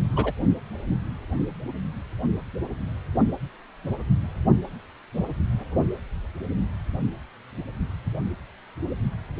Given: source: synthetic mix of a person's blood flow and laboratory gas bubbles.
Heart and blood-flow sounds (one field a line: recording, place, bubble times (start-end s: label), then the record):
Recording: Doppler ultrasound of blood flow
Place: precordium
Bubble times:
0.16-0.32 s: bubbles
From the record:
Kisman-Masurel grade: 122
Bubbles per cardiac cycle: 1 to 2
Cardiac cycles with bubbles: 10 to 50%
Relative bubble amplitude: moderate (0.250 to 0.450)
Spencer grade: 2 (many but less than half of the cardiac periods contain bubble signals, singularly or in groups)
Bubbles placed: only in the low amplitude regions of the cardiac cycle